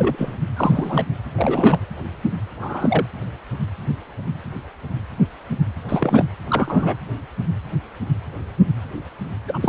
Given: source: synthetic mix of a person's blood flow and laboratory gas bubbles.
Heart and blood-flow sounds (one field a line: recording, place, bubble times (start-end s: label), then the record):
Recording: Doppler ultrasound of blood flow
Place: precordium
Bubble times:
0.00-0.33 s: bubbles
0.56-1.04 s: bubbles
1.35-1.86 s: bubbles
2.61-3.06 s: bubbles
5.88-6.25 s: bubbles
6.48-6.97 s: bubbles
9.47-9.69 s: bubbles
From the record:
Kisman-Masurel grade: 223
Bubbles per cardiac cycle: several, 3 to 8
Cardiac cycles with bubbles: 10 to 50%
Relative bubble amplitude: loud (0.450 to 0.775)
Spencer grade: 2 (many but less than half of the cardiac periods contain bubble signals, singularly or in groups)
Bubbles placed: anywhere in the cardiac cycle